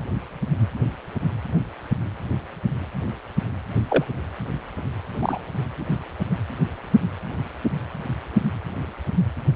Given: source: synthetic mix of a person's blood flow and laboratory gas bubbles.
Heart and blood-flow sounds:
Doppler ultrasound of blood flow; precordium
3.89-4.04 s: bubbles
5.19-5.40 s: bubbles
From the record:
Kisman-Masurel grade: 122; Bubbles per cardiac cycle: 1 to 2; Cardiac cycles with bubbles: 10 to 50%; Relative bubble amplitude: moderate (0.250 to 0.450); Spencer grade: 2 (many but less than half of the cardiac periods contain bubble signals, singularly or in groups); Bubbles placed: anywhere in the cardiac cycle

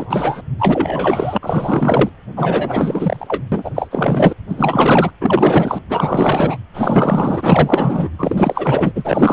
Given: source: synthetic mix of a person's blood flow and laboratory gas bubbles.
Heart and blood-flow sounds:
Doppler ultrasound of blood flow; precordium
0.00-0.41 s: bubbles
0.59-1.38 s: bubbles
1.42-2.10 s: bubbles
2.37-3.43 s: bubbles
3.52-3.71 s: bubbles
3.75-4.33 s: bubbles
4.49-5.11 s: bubbles
5.21-5.81 s: bubbles
5.89-6.57 s: bubbles
6.74-8.09 s: bubbles
8.18-8.92 s: bubbles
8.94-9.33 s: bubbles
From the record:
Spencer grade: 4 (maximum detectable bubble signal sounding continuously throughout systole and diastole of every cardiac period, and overriding the amplitude of the normal cardiac signals); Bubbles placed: anywhere in the cardiac cycle

